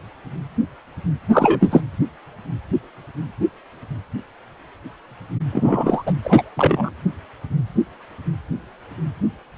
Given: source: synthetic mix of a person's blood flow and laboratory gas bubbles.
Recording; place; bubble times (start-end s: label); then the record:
Doppler ultrasound of blood flow; precordium
1.32-1.81 s: bubbles
5.52-6.03 s: bubbles
6.06-6.13 s: bubbles
6.24-6.43 s: bubbles
6.56-6.90 s: bubbles
From the record:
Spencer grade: 2 (many but less than half of the cardiac periods contain bubble signals, singularly or in groups); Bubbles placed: anywhere in the cardiac cycle